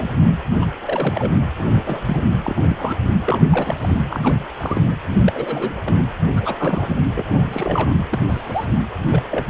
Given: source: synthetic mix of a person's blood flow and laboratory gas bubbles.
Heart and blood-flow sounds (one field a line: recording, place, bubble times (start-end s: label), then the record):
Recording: Doppler ultrasound of blood flow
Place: precordium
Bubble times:
0.00-0.17 s: bubbles
0.61-0.67 s: bubbles
0.86-1.43 s: bubbles
1.58-2.02 s: bubbles
2.06-2.22 s: bubbles
2.44-2.60 s: bubbles
2.62-2.97 s: bubbles
3.25-3.43 s: bubbles
3.50-3.98 s: bubbles
4.09-4.45 s: bubbles
4.57-4.82 s: bubbles
5.24-5.94 s: bubbles
5.96-6.06 s: bubbles
6.36-6.97 s: bubbles
7.15-7.24 s: bubbles
7.29-7.93 s: bubbles
8.10-8.20 s: bubbles
8.28-8.66 s: bubbles
9.10-9.22 s: bubbles
9.30-9.46 s: bubbles
From the record:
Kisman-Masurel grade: 232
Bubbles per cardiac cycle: several, 3 to 8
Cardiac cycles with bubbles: 50 to 99%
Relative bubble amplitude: moderate (0.250 to 0.450)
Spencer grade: 3 (all of the cardiac periods contain showers or single bubble signals, but not dominating or overriding the cardiac motion signals)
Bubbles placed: anywhere in the cardiac cycle